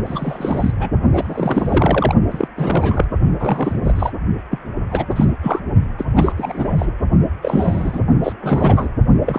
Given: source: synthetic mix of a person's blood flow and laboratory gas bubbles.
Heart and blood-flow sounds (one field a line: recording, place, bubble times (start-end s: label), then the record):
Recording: Doppler ultrasound of blood flow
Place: precordium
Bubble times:
0.05-0.72 s: bubbles
0.78-0.89 s: bubbles
1.13-2.15 s: bubbles
2.30-2.48 s: bubbles
2.55-3.05 s: bubbles
3.40-3.79 s: bubbles
3.83-4.12 s: bubbles
4.50-4.58 s: bubbles
4.91-5.06 s: bubbles
5.10-5.32 s: bubbles
5.43-5.60 s: bubbles
5.98-6.04 s: bubbles
6.16-6.33 s: bubbles
6.37-6.93 s: bubbles
7.42-8.00 s: bubbles
8.23-8.33 s: bubbles
8.41-8.89 s: bubbles
9.26-9.39 s: bubbles
From the record:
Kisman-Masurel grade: 342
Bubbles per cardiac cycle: rolling drumbeat, 9 or more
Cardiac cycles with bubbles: 100%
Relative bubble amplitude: moderate (0.250 to 0.450)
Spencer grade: 3 (all of the cardiac periods contain showers or single bubble signals, but not dominating or overriding the cardiac motion signals)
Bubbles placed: only in the low amplitude regions of the cardiac cycle